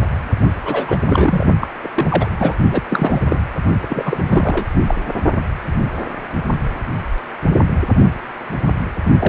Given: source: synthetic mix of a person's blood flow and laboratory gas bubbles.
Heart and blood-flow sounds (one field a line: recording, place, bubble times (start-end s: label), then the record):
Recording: Doppler ultrasound of blood flow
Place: precordium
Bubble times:
0.65-0.97 s: bubbles
1.08-1.47 s: bubbles
1.60-1.67 s: bubbles
1.83-1.88 s: bubbles
1.96-2.28 s: bubbles
2.38-2.54 s: bubbles
2.71-2.82 s: bubbles
2.90-3.22 s: bubbles
3.29-3.38 s: bubbles
3.82-4.66 s: bubbles
4.88-4.95 s: bubbles
9.19-9.29 s: bubbles
From the record:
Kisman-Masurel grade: 332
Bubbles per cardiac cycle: rolling drumbeat, 9 or more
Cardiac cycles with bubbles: 50 to 99%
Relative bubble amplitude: moderate (0.250 to 0.450)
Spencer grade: 3 (all of the cardiac periods contain showers or single bubble signals, but not dominating or overriding the cardiac motion signals)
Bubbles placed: only in the low amplitude regions of the cardiac cycle